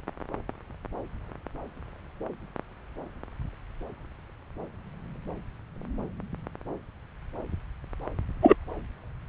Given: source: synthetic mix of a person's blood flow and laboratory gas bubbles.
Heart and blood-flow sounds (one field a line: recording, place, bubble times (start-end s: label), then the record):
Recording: Doppler ultrasound of blood flow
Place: subclavian vein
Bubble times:
8.42-8.56 s: bubbles
From the record:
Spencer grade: 1 (occasional bubble signal discernible with the cardiac motion signal, with majority of cardiac periods free of bubbles)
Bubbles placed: anywhere in the cardiac cycle